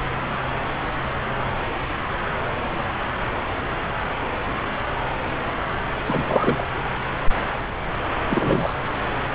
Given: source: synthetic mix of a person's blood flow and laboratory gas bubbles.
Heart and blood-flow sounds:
Doppler ultrasound of blood flow; subclavian vein
6.04-6.64 s: bubbles
8.30-8.74 s: bubbles
From the record:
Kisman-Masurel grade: 212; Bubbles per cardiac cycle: several, 3 to 8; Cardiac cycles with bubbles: 1 to 10%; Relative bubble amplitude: moderate (0.250 to 0.450); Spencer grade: 1 (occasional bubble signal discernible with the cardiac motion signal, with majority of cardiac periods free of bubbles); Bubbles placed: anywhere in the cardiac cycle

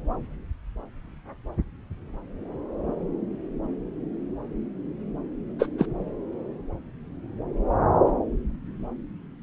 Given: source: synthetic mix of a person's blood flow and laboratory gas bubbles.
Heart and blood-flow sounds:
Doppler ultrasound of blood flow; subclavian vein
5.59-5.67 s: bubbles
5.78-5.86 s: bubbles
From the record:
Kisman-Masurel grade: 112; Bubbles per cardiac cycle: 1 to 2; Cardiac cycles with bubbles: 1 to 10%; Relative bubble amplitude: moderate (0.250 to 0.450); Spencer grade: 1 (occasional bubble signal discernible with the cardiac motion signal, with majority of cardiac periods free of bubbles); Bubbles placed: anywhere in the cardiac cycle

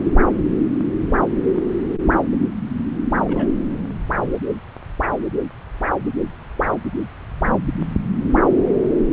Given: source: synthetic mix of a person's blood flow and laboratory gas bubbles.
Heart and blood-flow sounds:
Doppler ultrasound of blood flow; subclavian vein
3.24-3.49 s: bubbles
From the record:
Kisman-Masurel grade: 111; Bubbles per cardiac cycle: 1 to 2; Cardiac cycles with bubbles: 1 to 10%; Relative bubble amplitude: barely perceptible (0.100 to 0.250); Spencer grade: 1 (occasional bubble signal discernible with the cardiac motion signal, with majority of cardiac periods free of bubbles); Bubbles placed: anywhere in the cardiac cycle

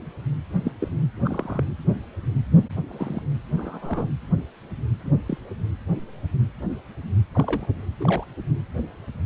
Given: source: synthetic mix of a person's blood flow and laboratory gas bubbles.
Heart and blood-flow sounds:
Doppler ultrasound of blood flow; precordium
0.65-0.71 s: bubbles
0.80-0.88 s: bubbles
1.24-1.64 s: bubbles
2.88-3.22 s: bubbles
3.57-4.09 s: bubbles
5.04-5.10 s: bubbles
5.26-5.38 s: bubbles
7.33-7.65 s: bubbles
8.00-8.25 s: bubbles
From the record:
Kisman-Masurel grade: 121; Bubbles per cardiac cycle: 1 to 2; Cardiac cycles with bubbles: 10 to 50%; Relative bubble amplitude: barely perceptible (0.100 to 0.250); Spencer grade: 2 (many but less than half of the cardiac periods contain bubble signals, singularly or in groups); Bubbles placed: anywhere in the cardiac cycle

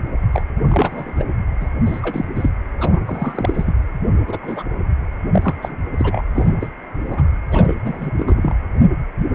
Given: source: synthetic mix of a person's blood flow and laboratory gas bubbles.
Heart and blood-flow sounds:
Doppler ultrasound of blood flow; precordium
0.32-0.43 s: bubbles
0.70-1.24 s: bubbles
1.61-1.70 s: bubbles
1.85-2.25 s: bubbles
2.35-2.50 s: bubbles
2.79-3.01 s: bubbles
3.06-3.73 s: bubbles
4.27-4.38 s: bubbles
4.42-4.63 s: bubbles
5.31-5.87 s: bubbles
5.98-6.25 s: bubbles
6.34-6.73 s: bubbles
6.96-7.25 s: bubbles
7.48-7.79 s: bubbles
7.84-8.12 s: bubbles
8.17-8.54 s: bubbles
9.17-9.27 s: bubbles
From the record:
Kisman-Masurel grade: 242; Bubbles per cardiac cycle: several, 3 to 8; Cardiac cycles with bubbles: 100%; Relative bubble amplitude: moderate (0.250 to 0.450); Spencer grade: 3 (all of the cardiac periods contain showers or single bubble signals, but not dominating or overriding the cardiac motion signals); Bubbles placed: anywhere in the cardiac cycle

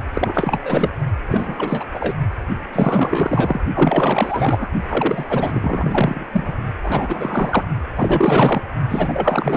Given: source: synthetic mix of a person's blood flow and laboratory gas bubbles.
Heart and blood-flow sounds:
Doppler ultrasound of blood flow; precordium
0.13-0.60 s: bubbles
0.65-0.90 s: bubbles
1.29-1.85 s: bubbles
1.94-2.15 s: bubbles
2.73-3.61 s: bubbles
3.75-4.70 s: bubbles
4.88-6.25 s: bubbles
6.33-6.53 s: bubbles
6.83-7.65 s: bubbles
7.95-8.62 s: bubbles
8.89-9.57 s: bubbles
From the record:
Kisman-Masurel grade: 444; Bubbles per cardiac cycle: continuous sound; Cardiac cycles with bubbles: 100%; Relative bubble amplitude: maximal (0.775 to 0.999); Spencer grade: 4 (maximum detectable bubble signal sounding continuously throughout systole and diastole of every cardiac period, and overriding the amplitude of the normal cardiac signals); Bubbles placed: only in the low amplitude regions of the cardiac cycle

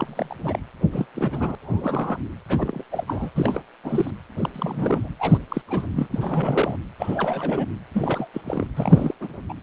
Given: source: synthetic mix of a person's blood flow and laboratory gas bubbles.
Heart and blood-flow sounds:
Doppler ultrasound of blood flow; precordium
0.00-0.60 s: bubbles
0.92-1.06 s: bubbles
1.15-1.55 s: bubbles
1.61-2.19 s: bubbles
2.47-2.84 s: bubbles
2.90-3.04 s: bubbles
3.07-3.30 s: bubbles
3.35-3.62 s: bubbles
3.83-4.11 s: bubbles
4.39-4.50 s: bubbles
4.54-5.13 s: bubbles
5.18-5.38 s: bubbles
5.48-5.62 s: bubbles
5.67-5.87 s: bubbles
5.91-6.77 s: bubbles
6.98-7.67 s: bubbles
7.93-8.28 s: bubbles
8.33-8.42 s: bubbles
8.44-8.67 s: bubbles
8.77-9.15 s: bubbles
9.21-9.42 s: bubbles
9.49-9.54 s: bubbles
From the record:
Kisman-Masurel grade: 342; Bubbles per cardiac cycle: rolling drumbeat, 9 or more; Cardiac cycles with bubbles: 100%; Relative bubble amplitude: moderate (0.250 to 0.450); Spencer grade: 3 (all of the cardiac periods contain showers or single bubble signals, but not dominating or overriding the cardiac motion signals); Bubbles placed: anywhere in the cardiac cycle

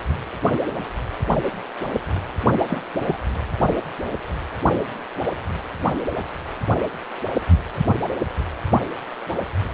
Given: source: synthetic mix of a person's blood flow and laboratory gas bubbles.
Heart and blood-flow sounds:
Doppler ultrasound of blood flow; precordium
2.67-2.79 s: bubbles
3.06-3.17 s: bubbles
From the record:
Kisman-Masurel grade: 112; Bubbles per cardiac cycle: 1 to 2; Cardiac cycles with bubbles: 1 to 10%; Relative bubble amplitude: moderate (0.250 to 0.450); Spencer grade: 1 (occasional bubble signal discernible with the cardiac motion signal, with majority of cardiac periods free of bubbles); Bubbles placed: anywhere in the cardiac cycle

